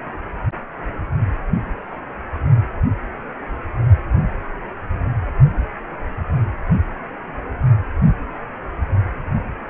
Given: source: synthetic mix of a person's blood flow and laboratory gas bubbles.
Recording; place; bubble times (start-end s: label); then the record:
Doppler ultrasound of blood flow; precordium
no bubbles
From the record:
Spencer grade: 0 (complete lack of bubble signals)